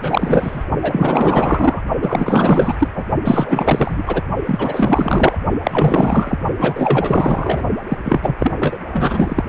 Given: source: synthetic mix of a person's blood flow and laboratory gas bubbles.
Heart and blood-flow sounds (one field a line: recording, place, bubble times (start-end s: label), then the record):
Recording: Doppler ultrasound of blood flow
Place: precordium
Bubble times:
0.02-0.65 s: bubbles
0.81-1.81 s: bubbles
2.02-2.75 s: bubbles
2.79-2.89 s: bubbles
2.95-3.05 s: bubbles
3.25-4.22 s: bubbles
4.46-5.37 s: bubbles
5.63-6.38 s: bubbles
6.58-7.63 s: bubbles
7.88-7.98 s: bubbles
8.05-8.36 s: bubbles
8.38-8.54 s: bubbles
8.59-8.79 s: bubbles
8.93-9.43 s: bubbles
From the record:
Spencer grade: 4 (maximum detectable bubble signal sounding continuously throughout systole and diastole of every cardiac period, and overriding the amplitude of the normal cardiac signals)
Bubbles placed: only in the low amplitude regions of the cardiac cycle